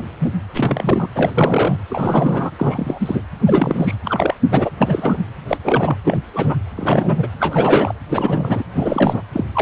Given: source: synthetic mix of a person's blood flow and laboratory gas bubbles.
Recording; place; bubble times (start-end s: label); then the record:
Doppler ultrasound of blood flow; precordium
0.00-0.03 s: bubbles
0.19-0.29 s: bubbles
0.54-1.09 s: bubbles
1.15-1.31 s: bubbles
1.37-1.76 s: bubbles
1.89-2.50 s: bubbles
2.58-3.22 s: bubbles
3.46-3.95 s: bubbles
4.05-4.34 s: bubbles
4.51-4.70 s: bubbles
4.79-5.18 s: bubbles
5.48-5.57 s: bubbles
5.64-5.97 s: bubbles
6.04-6.21 s: bubbles
6.33-6.56 s: bubbles
6.77-7.27 s: bubbles
7.39-7.93 s: bubbles
8.09-8.63 s: bubbles
8.73-9.22 s: bubbles
9.33-9.45 s: bubbles
9.53-9.61 s: bubbles
From the record:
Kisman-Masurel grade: 343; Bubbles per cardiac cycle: rolling drumbeat, 9 or more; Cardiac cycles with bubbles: 100%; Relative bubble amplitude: loud (0.450 to 0.775); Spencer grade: 3 (all of the cardiac periods contain showers or single bubble signals, but not dominating or overriding the cardiac motion signals); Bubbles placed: anywhere in the cardiac cycle